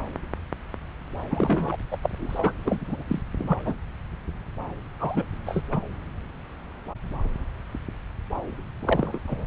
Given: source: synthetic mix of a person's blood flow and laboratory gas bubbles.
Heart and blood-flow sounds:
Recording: Doppler ultrasound of blood flow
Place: subclavian vein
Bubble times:
1.31-1.77 s: bubbles
1.91-1.98 s: bubbles
2.02-2.52 s: bubbles
2.65-3.03 s: bubbles
3.07-3.22 s: bubbles
3.37-3.74 s: bubbles
5.00-5.25 s: bubbles
5.46-5.62 s: bubbles
5.71-5.81 s: bubbles
8.80-9.19 s: bubbles
9.27-9.46 s: bubbles
From the record:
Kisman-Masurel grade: 232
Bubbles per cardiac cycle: several, 3 to 8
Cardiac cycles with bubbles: 50 to 99%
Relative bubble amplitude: moderate (0.250 to 0.450)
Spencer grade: 3 (all of the cardiac periods contain showers or single bubble signals, but not dominating or overriding the cardiac motion signals)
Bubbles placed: anywhere in the cardiac cycle

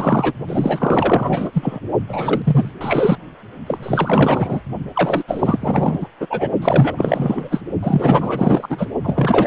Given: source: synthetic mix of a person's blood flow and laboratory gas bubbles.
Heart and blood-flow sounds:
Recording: Doppler ultrasound of blood flow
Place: precordium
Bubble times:
0.00-0.33 s: bubbles
0.47-1.49 s: bubbles
1.52-1.79 s: bubbles
2.08-2.71 s: bubbles
2.81-3.19 s: bubbles
3.67-4.61 s: bubbles
4.95-5.23 s: bubbles
5.28-6.08 s: bubbles
6.20-6.50 s: bubbles
6.62-7.61 s: bubbles
7.83-8.86 s: bubbles
9.03-9.47 s: bubbles
From the record:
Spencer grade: 4 (maximum detectable bubble signal sounding continuously throughout systole and diastole of every cardiac period, and overriding the amplitude of the normal cardiac signals)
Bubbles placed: only in the low amplitude regions of the cardiac cycle

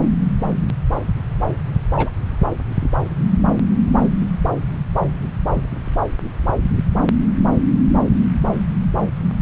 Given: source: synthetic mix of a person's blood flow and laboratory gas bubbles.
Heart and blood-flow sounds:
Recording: Doppler ultrasound of blood flow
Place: subclavian vein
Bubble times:
1.98-2.10 s: bubbles
From the record:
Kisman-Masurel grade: 112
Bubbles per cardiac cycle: 1 to 2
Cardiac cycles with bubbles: 1 to 10%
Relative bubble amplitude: moderate (0.250 to 0.450)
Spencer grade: 1 (occasional bubble signal discernible with the cardiac motion signal, with majority of cardiac periods free of bubbles)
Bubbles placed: anywhere in the cardiac cycle

